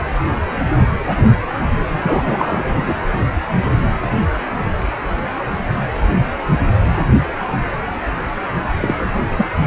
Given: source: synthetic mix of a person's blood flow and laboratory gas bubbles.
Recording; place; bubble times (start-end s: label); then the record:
Doppler ultrasound of blood flow; precordium
2.02-2.94 s: bubbles
8.80-8.95 s: bubbles
9.37-9.46 s: bubbles
9.63-9.67 s: bubbles
From the record:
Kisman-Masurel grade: 223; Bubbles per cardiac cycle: several, 3 to 8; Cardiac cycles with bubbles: 10 to 50%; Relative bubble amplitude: loud (0.450 to 0.775); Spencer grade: 2 (many but less than half of the cardiac periods contain bubble signals, singularly or in groups); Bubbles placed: anywhere in the cardiac cycle